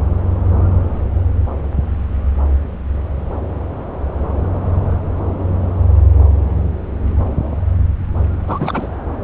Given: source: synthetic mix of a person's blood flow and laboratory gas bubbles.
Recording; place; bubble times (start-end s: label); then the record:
Doppler ultrasound of blood flow; subclavian vein
8.47-8.88 s: bubbles
From the record:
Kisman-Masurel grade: 212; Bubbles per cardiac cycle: several, 3 to 8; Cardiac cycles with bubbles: 1 to 10%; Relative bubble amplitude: moderate (0.250 to 0.450); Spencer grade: 1 (occasional bubble signal discernible with the cardiac motion signal, with majority of cardiac periods free of bubbles); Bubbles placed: anywhere in the cardiac cycle